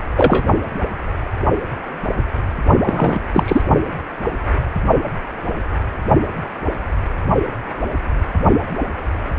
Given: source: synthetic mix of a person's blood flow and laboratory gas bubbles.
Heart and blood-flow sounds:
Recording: Doppler ultrasound of blood flow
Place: precordium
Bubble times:
0.16-0.45 s: bubbles
2.85-3.19 s: bubbles
3.33-3.61 s: bubbles
From the record:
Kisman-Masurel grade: 223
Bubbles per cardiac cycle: several, 3 to 8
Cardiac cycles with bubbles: 10 to 50%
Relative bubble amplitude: loud (0.450 to 0.775)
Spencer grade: 2 (many but less than half of the cardiac periods contain bubble signals, singularly or in groups)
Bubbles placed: only in the low amplitude regions of the cardiac cycle

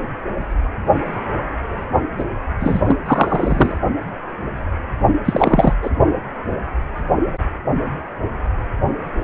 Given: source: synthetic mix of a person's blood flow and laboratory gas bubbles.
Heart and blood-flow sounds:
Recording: Doppler ultrasound of blood flow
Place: precordium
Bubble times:
2.18-2.24 s: bubbles
2.60-2.81 s: bubbles
2.85-2.96 s: bubbles
3.06-3.78 s: bubbles
5.25-5.74 s: bubbles
5.83-5.90 s: bubbles
From the record:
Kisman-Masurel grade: 223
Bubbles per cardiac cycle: several, 3 to 8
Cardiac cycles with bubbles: 10 to 50%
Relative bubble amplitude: loud (0.450 to 0.775)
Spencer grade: 2 (many but less than half of the cardiac periods contain bubble signals, singularly or in groups)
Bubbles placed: only in the low amplitude regions of the cardiac cycle

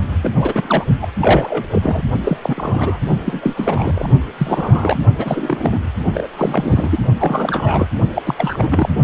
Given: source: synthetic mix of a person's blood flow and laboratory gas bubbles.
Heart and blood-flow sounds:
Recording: Doppler ultrasound of blood flow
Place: precordium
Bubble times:
0.21-0.32 s: bubbles
0.39-0.84 s: bubbles
1.02-1.07 s: bubbles
1.21-1.67 s: bubbles
1.71-2.02 s: bubbles
2.24-2.39 s: bubbles
2.42-3.00 s: bubbles
3.25-4.08 s: bubbles
4.38-4.99 s: bubbles
5.17-5.91 s: bubbles
6.14-6.27 s: bubbles
6.36-6.99 s: bubbles
7.19-7.87 s: bubbles
8.15-8.22 s: bubbles
8.25-8.35 s: bubbles
8.38-8.89 s: bubbles
From the record:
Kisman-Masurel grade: 343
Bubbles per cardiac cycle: rolling drumbeat, 9 or more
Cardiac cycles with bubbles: 100%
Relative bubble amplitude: loud (0.450 to 0.775)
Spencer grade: 3 (all of the cardiac periods contain showers or single bubble signals, but not dominating or overriding the cardiac motion signals)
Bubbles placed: only in the low amplitude regions of the cardiac cycle

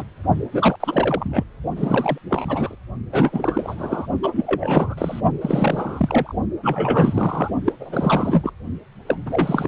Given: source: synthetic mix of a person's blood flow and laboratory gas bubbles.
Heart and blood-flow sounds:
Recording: Doppler ultrasound of blood flow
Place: precordium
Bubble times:
0.00-0.04 s: bubbles
0.52-0.76 s: bubbles
0.80-1.44 s: bubbles
1.76-2.18 s: bubbles
2.29-2.76 s: bubbles
3.12-4.06 s: bubbles
4.23-5.20 s: bubbles
5.41-6.35 s: bubbles
6.62-7.51 s: bubbles
7.65-7.72 s: bubbles
7.79-8.51 s: bubbles
9.06-9.20 s: bubbles
9.26-9.68 s: bubbles
From the record:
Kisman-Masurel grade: 343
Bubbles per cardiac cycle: rolling drumbeat, 9 or more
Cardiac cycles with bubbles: 100%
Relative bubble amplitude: loud (0.450 to 0.775)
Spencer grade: 3 (all of the cardiac periods contain showers or single bubble signals, but not dominating or overriding the cardiac motion signals)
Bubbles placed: only in the low amplitude regions of the cardiac cycle

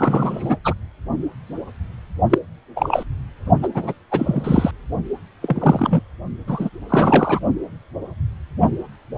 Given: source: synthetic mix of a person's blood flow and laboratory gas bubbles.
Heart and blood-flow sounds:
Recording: Doppler ultrasound of blood flow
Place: precordium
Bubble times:
0.00-0.56 s: bubbles
0.65-0.73 s: bubbles
2.29-2.38 s: bubbles
2.76-3.04 s: bubbles
3.62-3.68 s: bubbles
3.74-3.94 s: bubbles
4.11-4.71 s: bubbles
5.41-6.02 s: bubbles
6.46-6.70 s: bubbles
6.88-7.39 s: bubbles
From the record:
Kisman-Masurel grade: 233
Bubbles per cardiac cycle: several, 3 to 8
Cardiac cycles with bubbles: 50 to 99%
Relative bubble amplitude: loud (0.450 to 0.775)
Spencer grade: 3 (all of the cardiac periods contain showers or single bubble signals, but not dominating or overriding the cardiac motion signals)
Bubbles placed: only in the low amplitude regions of the cardiac cycle

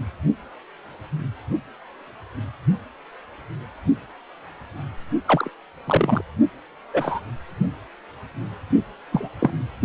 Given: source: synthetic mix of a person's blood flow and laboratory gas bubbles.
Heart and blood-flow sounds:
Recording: Doppler ultrasound of blood flow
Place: precordium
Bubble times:
5.25-5.51 s: bubbles
5.86-6.21 s: bubbles
6.93-7.20 s: bubbles
9.12-9.28 s: bubbles
9.39-9.50 s: bubbles
From the record:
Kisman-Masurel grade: 122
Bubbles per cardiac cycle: 1 to 2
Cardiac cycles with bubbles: 10 to 50%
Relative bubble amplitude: moderate (0.250 to 0.450)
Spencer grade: 2 (many but less than half of the cardiac periods contain bubble signals, singularly or in groups)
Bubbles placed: only in the low amplitude regions of the cardiac cycle

